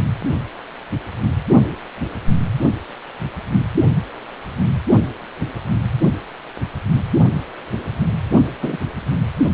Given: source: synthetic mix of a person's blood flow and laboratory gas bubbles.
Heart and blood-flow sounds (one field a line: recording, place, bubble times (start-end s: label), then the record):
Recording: Doppler ultrasound of blood flow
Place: precordium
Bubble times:
8.62-8.78 s: bubbles
From the record:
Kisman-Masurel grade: 113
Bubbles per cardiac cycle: 1 to 2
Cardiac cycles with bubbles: 1 to 10%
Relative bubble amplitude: loud (0.450 to 0.775)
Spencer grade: 1 (occasional bubble signal discernible with the cardiac motion signal, with majority of cardiac periods free of bubbles)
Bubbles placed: only in the low amplitude regions of the cardiac cycle